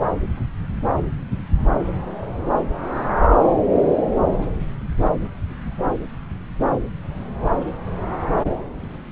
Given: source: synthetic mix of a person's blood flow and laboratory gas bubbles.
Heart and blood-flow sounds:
Doppler ultrasound of blood flow; subclavian vein
no bubbles
From the record:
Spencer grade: 0 (complete lack of bubble signals)

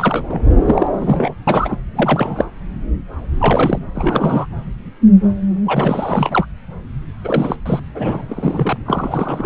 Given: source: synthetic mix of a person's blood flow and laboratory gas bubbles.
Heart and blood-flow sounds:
Doppler ultrasound of blood flow; subclavian vein
0.00-0.42 s: bubbles
0.65-0.87 s: bubbles
0.93-1.35 s: bubbles
1.47-1.77 s: bubbles
1.95-2.45 s: bubbles
3.39-3.78 s: bubbles
3.94-4.46 s: bubbles
5.65-6.46 s: bubbles
7.23-7.56 s: bubbles
7.66-7.80 s: bubbles
7.94-8.22 s: bubbles
8.28-8.78 s: bubbles
8.85-9.45 s: bubbles
From the record:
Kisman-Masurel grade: 332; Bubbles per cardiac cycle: rolling drumbeat, 9 or more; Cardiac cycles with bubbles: 50 to 99%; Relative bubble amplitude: moderate (0.250 to 0.450); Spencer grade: 3 (all of the cardiac periods contain showers or single bubble signals, but not dominating or overriding the cardiac motion signals); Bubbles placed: anywhere in the cardiac cycle

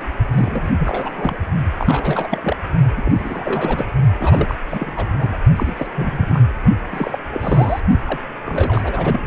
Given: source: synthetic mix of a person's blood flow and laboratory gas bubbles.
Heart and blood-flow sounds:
Doppler ultrasound of blood flow; precordium
0.00-0.03 s: bubbles
0.31-0.76 s: bubbles
0.79-1.48 s: bubbles
1.77-2.56 s: bubbles
2.96-3.91 s: bubbles
4.19-4.56 s: bubbles
4.68-4.92 s: bubbles
4.96-5.06 s: bubbles
5.18-5.35 s: bubbles
5.56-6.40 s: bubbles
6.91-7.18 s: bubbles
7.30-7.80 s: bubbles
8.05-8.19 s: bubbles
8.46-9.20 s: bubbles
From the record:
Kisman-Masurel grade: 342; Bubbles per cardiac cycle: rolling drumbeat, 9 or more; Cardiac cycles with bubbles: 100%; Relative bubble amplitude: moderate (0.250 to 0.450); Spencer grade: 3 (all of the cardiac periods contain showers or single bubble signals, but not dominating or overriding the cardiac motion signals); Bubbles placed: only in the low amplitude regions of the cardiac cycle

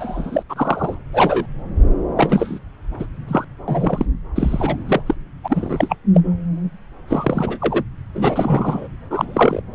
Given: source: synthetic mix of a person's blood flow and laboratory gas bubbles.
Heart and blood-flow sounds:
Doppler ultrasound of blood flow; subclavian vein
0.00-0.43 s: bubbles
0.49-0.94 s: bubbles
1.13-1.46 s: bubbles
2.16-2.59 s: bubbles
2.99-3.06 s: bubbles
3.27-3.44 s: bubbles
3.67-4.05 s: bubbles
4.35-4.77 s: bubbles
4.87-5.01 s: bubbles
5.06-5.14 s: bubbles
5.43-5.96 s: bubbles
6.14-6.22 s: bubbles
7.08-7.83 s: bubbles
8.14-8.88 s: bubbles
9.10-9.61 s: bubbles
From the record:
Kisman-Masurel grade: 243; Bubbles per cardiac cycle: several, 3 to 8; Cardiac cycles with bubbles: 100%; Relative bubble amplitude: loud (0.450 to 0.775); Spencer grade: 3 (all of the cardiac periods contain showers or single bubble signals, but not dominating or overriding the cardiac motion signals); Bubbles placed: anywhere in the cardiac cycle

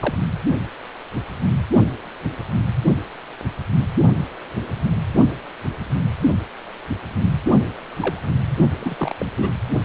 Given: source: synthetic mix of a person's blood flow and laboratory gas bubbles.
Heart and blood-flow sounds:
Doppler ultrasound of blood flow; precordium
0.00-0.15 s: bubbles
7.98-8.24 s: bubbles
8.79-9.15 s: bubbles
9.19-9.26 s: bubbles
9.36-9.56 s: bubbles
From the record:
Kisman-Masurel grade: 222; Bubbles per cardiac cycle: several, 3 to 8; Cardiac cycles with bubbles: 10 to 50%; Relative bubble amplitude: moderate (0.250 to 0.450); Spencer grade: 2 (many but less than half of the cardiac periods contain bubble signals, singularly or in groups); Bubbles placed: only in the low amplitude regions of the cardiac cycle

